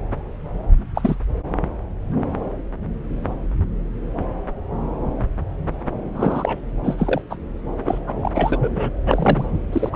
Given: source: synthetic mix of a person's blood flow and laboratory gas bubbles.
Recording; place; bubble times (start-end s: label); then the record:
Doppler ultrasound of blood flow; subclavian vein
0.94-1.16 s: bubbles
6.14-6.61 s: bubbles
6.83-6.96 s: bubbles
6.98-7.21 s: bubbles
7.29-7.36 s: bubbles
7.86-8.01 s: bubbles
8.06-8.31 s: bubbles
8.35-8.90 s: bubbles
9.05-9.46 s: bubbles
9.72-9.96 s: bubbles
From the record:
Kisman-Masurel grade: 222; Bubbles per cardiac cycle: several, 3 to 8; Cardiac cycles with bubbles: 10 to 50%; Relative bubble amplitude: moderate (0.250 to 0.450); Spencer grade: 2 (many but less than half of the cardiac periods contain bubble signals, singularly or in groups); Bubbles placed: anywhere in the cardiac cycle